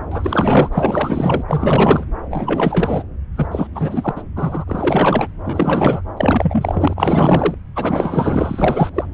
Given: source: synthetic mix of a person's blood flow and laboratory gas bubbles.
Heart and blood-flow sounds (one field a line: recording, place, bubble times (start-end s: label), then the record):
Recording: Doppler ultrasound of blood flow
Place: subclavian vein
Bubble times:
0.11-0.70 s: bubbles
0.72-1.44 s: bubbles
1.48-2.05 s: bubbles
2.30-3.02 s: bubbles
3.35-3.47 s: bubbles
3.51-3.67 s: bubbles
3.74-4.22 s: bubbles
4.35-4.64 s: bubbles
4.67-5.27 s: bubbles
5.44-6.01 s: bubbles
6.17-7.54 s: bubbles
7.75-8.90 s: bubbles
8.94-9.07 s: bubbles
From the record:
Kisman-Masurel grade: 444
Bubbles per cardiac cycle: continuous sound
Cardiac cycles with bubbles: 100%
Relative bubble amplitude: maximal (0.775 to 0.999)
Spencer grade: 4 (maximum detectable bubble signal sounding continuously throughout systole and diastole of every cardiac period, and overriding the amplitude of the normal cardiac signals)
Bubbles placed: anywhere in the cardiac cycle